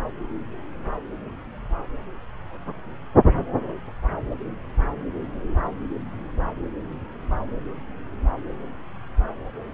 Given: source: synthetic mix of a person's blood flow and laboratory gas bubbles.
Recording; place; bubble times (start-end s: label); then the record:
Doppler ultrasound of blood flow; subclavian vein
no bubbles
From the record:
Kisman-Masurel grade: 000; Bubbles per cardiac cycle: 0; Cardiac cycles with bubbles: 0%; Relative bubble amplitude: no bubbles discernible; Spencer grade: 0 (complete lack of bubble signals)